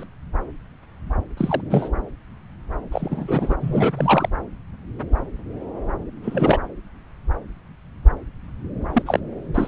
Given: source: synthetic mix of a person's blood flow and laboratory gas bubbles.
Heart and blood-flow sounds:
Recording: Doppler ultrasound of blood flow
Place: subclavian vein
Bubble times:
0.00-0.03 s: bubbles
1.37-1.61 s: bubbles
1.70-1.90 s: bubbles
2.92-3.55 s: bubbles
3.60-4.29 s: bubbles
6.23-6.59 s: bubbles
8.93-9.02 s: bubbles
9.06-9.20 s: bubbles
9.54-9.68 s: bubbles
From the record:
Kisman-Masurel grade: 232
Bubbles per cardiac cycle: several, 3 to 8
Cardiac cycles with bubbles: 50 to 99%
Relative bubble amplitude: moderate (0.250 to 0.450)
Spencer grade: 3 (all of the cardiac periods contain showers or single bubble signals, but not dominating or overriding the cardiac motion signals)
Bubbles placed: anywhere in the cardiac cycle

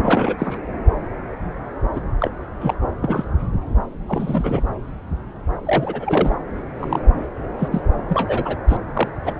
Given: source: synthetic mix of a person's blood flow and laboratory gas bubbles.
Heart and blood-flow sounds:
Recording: Doppler ultrasound of blood flow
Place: subclavian vein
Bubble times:
0.00-0.35 s: bubbles
0.38-0.57 s: bubbles
1.94-2.01 s: bubbles
2.19-2.30 s: bubbles
2.60-2.74 s: bubbles
3.01-3.24 s: bubbles
4.08-4.62 s: bubbles
5.66-6.36 s: bubbles
6.79-7.00 s: bubbles
7.58-7.68 s: bubbles
7.72-7.83 s: bubbles
8.08-8.57 s: bubbles
8.68-8.77 s: bubbles
8.93-9.08 s: bubbles
9.24-9.33 s: bubbles
From the record:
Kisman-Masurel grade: 232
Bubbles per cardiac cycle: several, 3 to 8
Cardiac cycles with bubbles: 50 to 99%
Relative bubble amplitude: moderate (0.250 to 0.450)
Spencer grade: 3 (all of the cardiac periods contain showers or single bubble signals, but not dominating or overriding the cardiac motion signals)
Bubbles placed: anywhere in the cardiac cycle

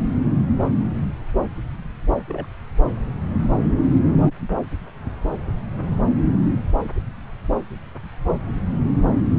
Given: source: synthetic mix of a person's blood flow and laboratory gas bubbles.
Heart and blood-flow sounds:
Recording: Doppler ultrasound of blood flow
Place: subclavian vein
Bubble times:
0.23-0.44 s: bubbles
2.29-2.46 s: bubbles
From the record:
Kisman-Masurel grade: 111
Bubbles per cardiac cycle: 1 to 2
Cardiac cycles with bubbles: 1 to 10%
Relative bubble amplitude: barely perceptible (0.100 to 0.250)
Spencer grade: 1 (occasional bubble signal discernible with the cardiac motion signal, with majority of cardiac periods free of bubbles)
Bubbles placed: anywhere in the cardiac cycle

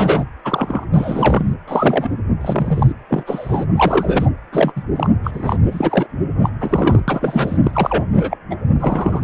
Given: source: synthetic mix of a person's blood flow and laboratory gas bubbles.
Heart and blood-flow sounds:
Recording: Doppler ultrasound of blood flow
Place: precordium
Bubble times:
0.00-0.24 s: bubbles
0.44-0.85 s: bubbles
0.92-1.54 s: bubbles
1.68-2.15 s: bubbles
2.41-2.93 s: bubbles
3.08-3.23 s: bubbles
3.26-3.65 s: bubbles
3.76-4.30 s: bubbles
4.52-4.72 s: bubbles
4.76-4.83 s: bubbles
4.96-5.06 s: bubbles
5.23-5.56 s: bubbles
5.65-6.06 s: bubbles
6.42-6.49 s: bubbles
6.60-6.99 s: bubbles
7.07-7.57 s: bubbles
7.63-8.04 s: bubbles
8.14-8.37 s: bubbles
8.50-8.55 s: bubbles
8.75-9.24 s: bubbles
From the record:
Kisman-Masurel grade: 243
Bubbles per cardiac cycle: several, 3 to 8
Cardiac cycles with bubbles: 100%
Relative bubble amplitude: loud (0.450 to 0.775)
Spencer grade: 3 (all of the cardiac periods contain showers or single bubble signals, but not dominating or overriding the cardiac motion signals)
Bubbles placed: anywhere in the cardiac cycle

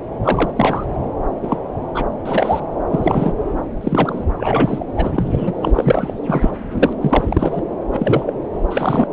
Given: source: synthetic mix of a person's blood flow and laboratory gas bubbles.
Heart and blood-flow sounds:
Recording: Doppler ultrasound of blood flow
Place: subclavian vein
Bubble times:
0.23-0.52 s: bubbles
0.55-0.84 s: bubbles
1.43-1.57 s: bubbles
1.95-2.06 s: bubbles
2.25-2.60 s: bubbles
2.90-3.33 s: bubbles
3.81-4.24 s: bubbles
4.37-4.84 s: bubbles
4.96-5.53 s: bubbles
5.62-5.71 s: bubbles
5.75-6.13 s: bubbles
6.26-6.51 s: bubbles
6.71-6.95 s: bubbles
7.00-7.64 s: bubbles
7.92-8.34 s: bubbles
8.70-9.07 s: bubbles
From the record:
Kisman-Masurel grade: 243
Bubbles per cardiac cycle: several, 3 to 8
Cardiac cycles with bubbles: 100%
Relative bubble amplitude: loud (0.450 to 0.775)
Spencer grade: 3 (all of the cardiac periods contain showers or single bubble signals, but not dominating or overriding the cardiac motion signals)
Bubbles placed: anywhere in the cardiac cycle

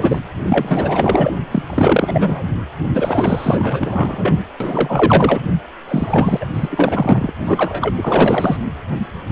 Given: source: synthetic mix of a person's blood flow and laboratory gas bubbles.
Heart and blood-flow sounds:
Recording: Doppler ultrasound of blood flow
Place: precordium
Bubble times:
0.00-0.19 s: bubbles
0.44-1.33 s: bubbles
1.51-1.62 s: bubbles
1.69-2.42 s: bubbles
2.94-4.43 s: bubbles
4.60-5.40 s: bubbles
5.88-6.45 s: bubbles
6.53-7.32 s: bubbles
7.44-8.56 s: bubbles
From the record:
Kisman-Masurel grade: 444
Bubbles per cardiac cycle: continuous sound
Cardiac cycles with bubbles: 100%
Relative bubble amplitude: maximal (0.775 to 0.999)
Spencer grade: 4 (maximum detectable bubble signal sounding continuously throughout systole and diastole of every cardiac period, and overriding the amplitude of the normal cardiac signals)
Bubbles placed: anywhere in the cardiac cycle

